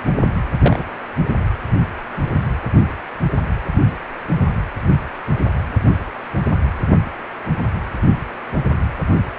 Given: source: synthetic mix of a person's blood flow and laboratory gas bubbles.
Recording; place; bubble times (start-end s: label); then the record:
Doppler ultrasound of blood flow; precordium
0.60-0.84 s: bubbles
From the record:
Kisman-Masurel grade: 112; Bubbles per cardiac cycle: 1 to 2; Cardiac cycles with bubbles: 1 to 10%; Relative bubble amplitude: moderate (0.250 to 0.450); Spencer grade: 1 (occasional bubble signal discernible with the cardiac motion signal, with majority of cardiac periods free of bubbles); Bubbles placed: anywhere in the cardiac cycle